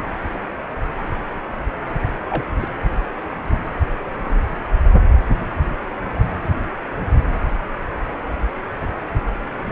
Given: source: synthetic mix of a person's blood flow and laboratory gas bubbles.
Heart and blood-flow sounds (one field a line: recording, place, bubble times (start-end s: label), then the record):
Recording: Doppler ultrasound of blood flow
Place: precordium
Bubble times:
2.29-2.45 s: bubbles
2.60-2.68 s: bubbles
From the record:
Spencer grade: 1 (occasional bubble signal discernible with the cardiac motion signal, with majority of cardiac periods free of bubbles)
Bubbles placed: anywhere in the cardiac cycle